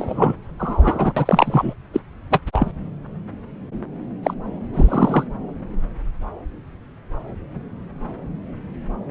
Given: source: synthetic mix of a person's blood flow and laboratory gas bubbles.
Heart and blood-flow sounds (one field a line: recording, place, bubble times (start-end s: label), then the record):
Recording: Doppler ultrasound of blood flow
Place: subclavian vein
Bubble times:
0.00-0.36 s: bubbles
0.59-1.12 s: bubbles
1.16-1.74 s: bubbles
1.93-2.00 s: bubbles
2.30-2.41 s: bubbles
2.53-2.71 s: bubbles
4.23-4.34 s: bubbles
4.74-5.24 s: bubbles
From the record:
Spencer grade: 2 (many but less than half of the cardiac periods contain bubble signals, singularly or in groups)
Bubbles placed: anywhere in the cardiac cycle